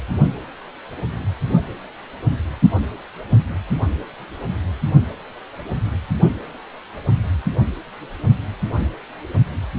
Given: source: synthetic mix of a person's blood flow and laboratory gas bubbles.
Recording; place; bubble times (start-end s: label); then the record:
Doppler ultrasound of blood flow; precordium
no bubbles
From the record:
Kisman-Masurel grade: 000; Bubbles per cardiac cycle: 0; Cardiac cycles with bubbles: 0%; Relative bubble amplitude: no bubbles discernible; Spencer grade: 0 (complete lack of bubble signals)